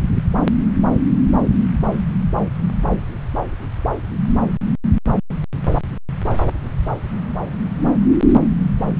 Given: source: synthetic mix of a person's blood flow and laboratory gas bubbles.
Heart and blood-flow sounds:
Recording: Doppler ultrasound of blood flow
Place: subclavian vein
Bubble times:
no bubbles
From the record:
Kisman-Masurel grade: 000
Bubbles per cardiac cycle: 0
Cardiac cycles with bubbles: 0%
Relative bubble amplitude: no bubbles discernible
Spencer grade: 0 (complete lack of bubble signals)

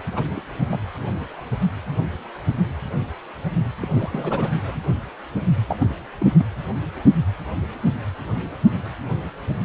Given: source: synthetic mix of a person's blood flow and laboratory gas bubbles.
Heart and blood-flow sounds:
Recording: Doppler ultrasound of blood flow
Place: precordium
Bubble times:
0.15-0.24 s: bubbles
0.35-0.42 s: bubbles
0.71-0.79 s: bubbles
3.82-3.87 s: bubbles
3.90-4.50 s: bubbles
4.67-4.77 s: bubbles
5.68-5.76 s: bubbles
5.80-5.86 s: bubbles
6.19-6.27 s: bubbles
6.38-6.45 s: bubbles
From the record:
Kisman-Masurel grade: 221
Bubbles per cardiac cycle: several, 3 to 8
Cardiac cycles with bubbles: 10 to 50%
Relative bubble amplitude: barely perceptible (0.100 to 0.250)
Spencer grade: 2 (many but less than half of the cardiac periods contain bubble signals, singularly or in groups)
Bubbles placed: anywhere in the cardiac cycle

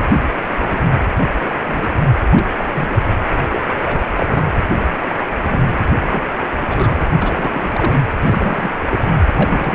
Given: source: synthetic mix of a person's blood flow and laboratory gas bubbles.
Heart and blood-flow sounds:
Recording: Doppler ultrasound of blood flow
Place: precordium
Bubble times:
0.56-0.82 s: bubbles
1.42-1.54 s: bubbles
1.66-1.98 s: bubbles
2.30-2.46 s: bubbles
2.57-3.06 s: bubbles
3.50-3.63 s: bubbles
3.84-4.00 s: bubbles
4.16-4.53 s: bubbles
5.08-5.16 s: bubbles
5.45-5.72 s: bubbles
5.96-6.25 s: bubbles
6.56-7.00 s: bubbles
7.20-7.95 s: bubbles
8.20-8.72 s: bubbles
8.91-9.00 s: bubbles
9.07-9.19 s: bubbles
9.29-9.75 s: bubbles
From the record:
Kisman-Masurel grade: 242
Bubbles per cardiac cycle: several, 3 to 8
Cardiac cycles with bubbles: 100%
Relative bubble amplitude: moderate (0.250 to 0.450)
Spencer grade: 3 (all of the cardiac periods contain showers or single bubble signals, but not dominating or overriding the cardiac motion signals)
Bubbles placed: anywhere in the cardiac cycle

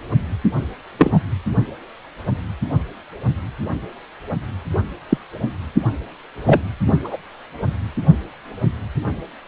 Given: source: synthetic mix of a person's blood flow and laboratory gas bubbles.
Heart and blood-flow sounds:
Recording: Doppler ultrasound of blood flow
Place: precordium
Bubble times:
0.98-1.18 s: bubbles
5.09-5.17 s: bubbles
6.46-6.62 s: bubbles
6.87-6.94 s: bubbles
7.04-7.17 s: bubbles
From the record:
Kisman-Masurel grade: 123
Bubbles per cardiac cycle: 1 to 2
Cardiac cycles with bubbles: 10 to 50%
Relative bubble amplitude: loud (0.450 to 0.775)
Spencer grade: 2 (many but less than half of the cardiac periods contain bubble signals, singularly or in groups)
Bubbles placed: anywhere in the cardiac cycle

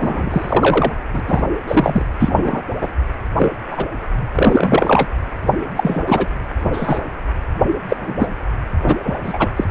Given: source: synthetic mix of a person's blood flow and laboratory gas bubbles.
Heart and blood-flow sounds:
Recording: Doppler ultrasound of blood flow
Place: precordium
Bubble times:
0.00-0.92 s: bubbles
1.14-1.20 s: bubbles
1.27-1.43 s: bubbles
1.68-2.05 s: bubbles
2.19-2.62 s: bubbles
2.81-2.88 s: bubbles
3.36-3.52 s: bubbles
3.71-3.86 s: bubbles
4.35-5.07 s: bubbles
5.76-6.03 s: bubbles
6.06-6.27 s: bubbles
6.73-7.01 s: bubbles
7.88-8.28 s: bubbles
8.84-8.96 s: bubbles
9.03-9.52 s: bubbles
9.56-9.64 s: bubbles
From the record:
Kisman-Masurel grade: 243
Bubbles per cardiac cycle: several, 3 to 8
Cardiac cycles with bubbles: 100%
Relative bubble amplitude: loud (0.450 to 0.775)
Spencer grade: 3 (all of the cardiac periods contain showers or single bubble signals, but not dominating or overriding the cardiac motion signals)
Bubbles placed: anywhere in the cardiac cycle

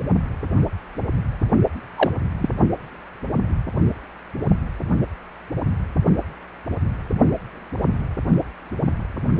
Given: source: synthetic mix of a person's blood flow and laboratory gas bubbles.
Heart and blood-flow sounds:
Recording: Doppler ultrasound of blood flow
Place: precordium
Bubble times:
1.96-2.11 s: bubbles
2.38-2.49 s: bubbles
From the record:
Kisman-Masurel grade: 222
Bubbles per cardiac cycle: several, 3 to 8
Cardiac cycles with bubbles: 10 to 50%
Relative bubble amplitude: moderate (0.250 to 0.450)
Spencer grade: 2 (many but less than half of the cardiac periods contain bubble signals, singularly or in groups)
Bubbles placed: only in the low amplitude regions of the cardiac cycle

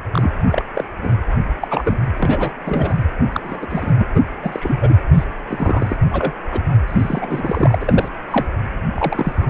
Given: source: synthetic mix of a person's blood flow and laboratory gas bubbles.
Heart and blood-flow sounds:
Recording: Doppler ultrasound of blood flow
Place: precordium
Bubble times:
0.13-0.31 s: bubbles
0.46-0.62 s: bubbles
0.75-0.84 s: bubbles
1.02-1.19 s: bubbles
1.61-1.98 s: bubbles
2.19-2.52 s: bubbles
2.65-2.98 s: bubbles
3.33-3.66 s: bubbles
3.70-4.08 s: bubbles
4.14-4.21 s: bubbles
4.42-4.96 s: bubbles
5.13-5.25 s: bubbles
5.47-5.96 s: bubbles
6.11-6.33 s: bubbles
6.50-6.63 s: bubbles
6.88-8.10 s: bubbles
8.30-8.46 s: bubbles
8.95-9.32 s: bubbles
9.36-9.50 s: bubbles
From the record:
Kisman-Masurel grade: 242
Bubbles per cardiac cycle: several, 3 to 8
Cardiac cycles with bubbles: 100%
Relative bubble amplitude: moderate (0.250 to 0.450)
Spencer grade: 3 (all of the cardiac periods contain showers or single bubble signals, but not dominating or overriding the cardiac motion signals)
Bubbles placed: anywhere in the cardiac cycle

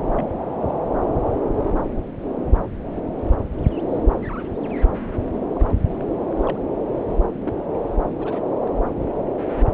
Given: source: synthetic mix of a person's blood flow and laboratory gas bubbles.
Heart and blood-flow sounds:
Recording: Doppler ultrasound of blood flow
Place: subclavian vein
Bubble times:
0.15-0.29 s: bubbles
0.61-0.74 s: bubbles
1.01-1.06 s: bubbles
1.42-1.48 s: bubbles
5.55-5.70 s: bubbles
5.97-6.04 s: bubbles
6.37-6.58 s: bubbles
7.26-7.63 s: bubbles
8.19-8.41 s: bubbles
8.64-8.69 s: bubbles
9.00-9.06 s: bubbles
From the record:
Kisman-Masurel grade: 121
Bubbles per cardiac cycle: 1 to 2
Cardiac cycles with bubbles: 10 to 50%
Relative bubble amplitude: barely perceptible (0.100 to 0.250)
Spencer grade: 2 (many but less than half of the cardiac periods contain bubble signals, singularly or in groups)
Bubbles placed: anywhere in the cardiac cycle

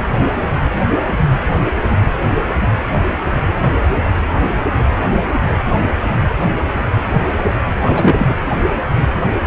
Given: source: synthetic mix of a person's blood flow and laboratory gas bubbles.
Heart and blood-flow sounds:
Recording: Doppler ultrasound of blood flow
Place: precordium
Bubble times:
7.85-8.37 s: bubbles
From the record:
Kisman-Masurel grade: 213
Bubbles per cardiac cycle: several, 3 to 8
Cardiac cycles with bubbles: 1 to 10%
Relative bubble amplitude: loud (0.450 to 0.775)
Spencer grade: 1 (occasional bubble signal discernible with the cardiac motion signal, with majority of cardiac periods free of bubbles)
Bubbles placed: anywhere in the cardiac cycle

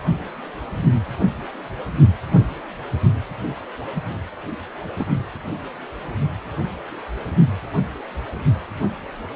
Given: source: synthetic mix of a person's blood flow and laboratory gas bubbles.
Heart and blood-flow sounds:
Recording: Doppler ultrasound of blood flow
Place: precordium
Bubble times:
5.00-5.05 s: bubbles
From the record:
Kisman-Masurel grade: 113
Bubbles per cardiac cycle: 1 to 2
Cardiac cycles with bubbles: 1 to 10%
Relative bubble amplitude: loud (0.450 to 0.775)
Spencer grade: 1 (occasional bubble signal discernible with the cardiac motion signal, with majority of cardiac periods free of bubbles)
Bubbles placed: anywhere in the cardiac cycle

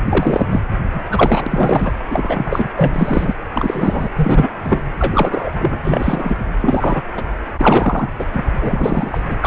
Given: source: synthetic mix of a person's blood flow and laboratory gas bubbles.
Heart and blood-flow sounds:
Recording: Doppler ultrasound of blood flow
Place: precordium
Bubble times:
0.09-0.46 s: bubbles
0.50-0.60 s: bubbles
0.94-1.04 s: bubbles
1.10-1.93 s: bubbles
2.10-2.69 s: bubbles
2.76-3.35 s: bubbles
3.55-4.08 s: bubbles
4.16-4.50 s: bubbles
4.64-4.83 s: bubbles
4.98-5.79 s: bubbles
5.84-6.37 s: bubbles
6.60-7.02 s: bubbles
7.17-7.24 s: bubbles
7.57-8.15 s: bubbles
8.19-8.25 s: bubbles
8.32-8.46 s: bubbles
8.60-9.21 s: bubbles
9.30-9.36 s: bubbles
9.41-9.47 s: bubbles
From the record:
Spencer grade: 3 (all of the cardiac periods contain showers or single bubble signals, but not dominating or overriding the cardiac motion signals)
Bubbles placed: anywhere in the cardiac cycle

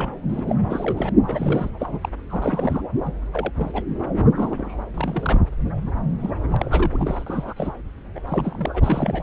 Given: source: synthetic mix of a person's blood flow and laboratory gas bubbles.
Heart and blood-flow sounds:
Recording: Doppler ultrasound of blood flow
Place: subclavian vein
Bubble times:
0.00-0.14 s: bubbles
0.29-0.43 s: bubbles
0.47-0.55 s: bubbles
0.69-1.09 s: bubbles
1.27-1.69 s: bubbles
1.79-2.09 s: bubbles
2.29-2.81 s: bubbles
3.05-3.12 s: bubbles
3.33-3.52 s: bubbles
3.56-3.85 s: bubbles
4.35-4.84 s: bubbles
4.94-5.40 s: bubbles
6.20-6.30 s: bubbles
6.43-6.47 s: bubbles
6.52-7.54 s: bubbles
7.56-7.72 s: bubbles
8.15-8.21 s: bubbles
8.26-8.80 s: bubbles
8.83-9.23 s: bubbles
From the record:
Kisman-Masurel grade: 242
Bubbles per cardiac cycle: several, 3 to 8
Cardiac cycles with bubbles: 100%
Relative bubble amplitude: moderate (0.250 to 0.450)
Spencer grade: 3 (all of the cardiac periods contain showers or single bubble signals, but not dominating or overriding the cardiac motion signals)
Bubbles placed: anywhere in the cardiac cycle

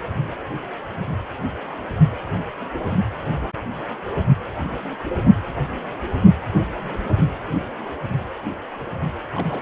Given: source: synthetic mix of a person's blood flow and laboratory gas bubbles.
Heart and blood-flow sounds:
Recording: Doppler ultrasound of blood flow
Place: precordium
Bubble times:
9.32-9.62 s: bubbles
From the record:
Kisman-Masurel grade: 211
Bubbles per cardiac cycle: several, 3 to 8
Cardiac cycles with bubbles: 1 to 10%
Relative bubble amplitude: barely perceptible (0.100 to 0.250)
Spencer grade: 1 (occasional bubble signal discernible with the cardiac motion signal, with majority of cardiac periods free of bubbles)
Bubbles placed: only in the low amplitude regions of the cardiac cycle

